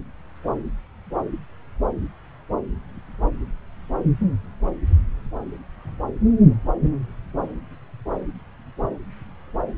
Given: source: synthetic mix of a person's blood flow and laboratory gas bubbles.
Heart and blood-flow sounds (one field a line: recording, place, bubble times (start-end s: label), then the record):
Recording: Doppler ultrasound of blood flow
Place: subclavian vein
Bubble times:
no bubbles
From the record:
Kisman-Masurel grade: 000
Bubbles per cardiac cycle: 0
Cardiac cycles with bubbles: 0%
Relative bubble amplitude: no bubbles discernible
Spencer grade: 0 (complete lack of bubble signals)